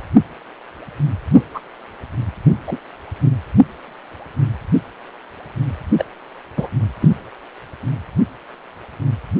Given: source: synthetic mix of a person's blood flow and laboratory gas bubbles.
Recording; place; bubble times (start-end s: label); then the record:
Doppler ultrasound of blood flow; precordium
1.33-1.45 s: bubbles
1.54-1.60 s: bubbles
2.67-2.78 s: bubbles
5.98-6.04 s: bubbles
6.56-6.68 s: bubbles
7.01-7.09 s: bubbles
From the record:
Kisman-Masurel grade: 123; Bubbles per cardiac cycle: 1 to 2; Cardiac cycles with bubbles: 10 to 50%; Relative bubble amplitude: loud (0.450 to 0.775); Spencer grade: 2 (many but less than half of the cardiac periods contain bubble signals, singularly or in groups); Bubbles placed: anywhere in the cardiac cycle